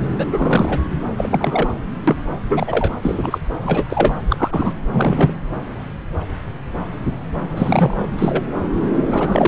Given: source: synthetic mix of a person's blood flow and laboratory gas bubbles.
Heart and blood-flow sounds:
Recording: Doppler ultrasound of blood flow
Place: subclavian vein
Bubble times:
0.17-0.27 s: bubbles
0.32-0.80 s: bubbles
1.17-1.73 s: bubbles
2.08-2.16 s: bubbles
2.48-2.91 s: bubbles
3.02-3.38 s: bubbles
3.63-4.14 s: bubbles
4.29-4.74 s: bubbles
4.92-5.33 s: bubbles
7.57-8.09 s: bubbles
8.17-8.45 s: bubbles
9.05-9.48 s: bubbles
From the record:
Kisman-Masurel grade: 233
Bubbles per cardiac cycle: several, 3 to 8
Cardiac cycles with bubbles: 50 to 99%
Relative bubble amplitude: loud (0.450 to 0.775)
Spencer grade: 3 (all of the cardiac periods contain showers or single bubble signals, but not dominating or overriding the cardiac motion signals)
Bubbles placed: anywhere in the cardiac cycle

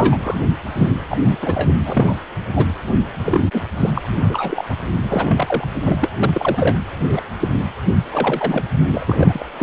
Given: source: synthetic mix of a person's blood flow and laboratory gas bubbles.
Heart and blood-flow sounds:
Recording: Doppler ultrasound of blood flow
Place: precordium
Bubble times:
0.00-0.17 s: bubbles
0.24-0.38 s: bubbles
0.74-0.90 s: bubbles
1.08-1.17 s: bubbles
1.27-1.38 s: bubbles
1.42-1.73 s: bubbles
1.84-2.15 s: bubbles
2.52-2.65 s: bubbles
3.23-3.41 s: bubbles
3.52-3.62 s: bubbles
3.77-3.91 s: bubbles
3.95-4.01 s: bubbles
4.16-4.65 s: bubbles
4.68-4.76 s: bubbles
5.03-5.67 s: bubbles
5.85-5.96 s: bubbles
6.01-6.11 s: bubbles
6.19-6.77 s: bubbles
7.04-7.21 s: bubbles
7.39-7.48 s: bubbles
8.11-8.65 s: bubbles
8.91-9.46 s: bubbles
9.59-9.63 s: bubbles
From the record:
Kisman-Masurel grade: 243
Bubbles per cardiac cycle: several, 3 to 8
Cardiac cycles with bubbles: 100%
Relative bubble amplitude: loud (0.450 to 0.775)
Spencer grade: 3 (all of the cardiac periods contain showers or single bubble signals, but not dominating or overriding the cardiac motion signals)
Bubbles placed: anywhere in the cardiac cycle

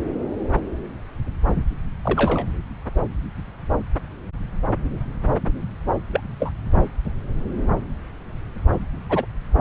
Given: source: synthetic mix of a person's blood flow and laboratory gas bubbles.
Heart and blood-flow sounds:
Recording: Doppler ultrasound of blood flow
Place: subclavian vein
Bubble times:
2.04-2.46 s: bubbles
6.13-6.21 s: bubbles
6.40-6.53 s: bubbles
8.72-8.79 s: bubbles
9.09-9.25 s: bubbles
From the record:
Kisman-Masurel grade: 122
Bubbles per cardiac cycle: 1 to 2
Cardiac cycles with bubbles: 10 to 50%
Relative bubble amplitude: moderate (0.250 to 0.450)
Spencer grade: 2 (many but less than half of the cardiac periods contain bubble signals, singularly or in groups)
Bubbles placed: anywhere in the cardiac cycle

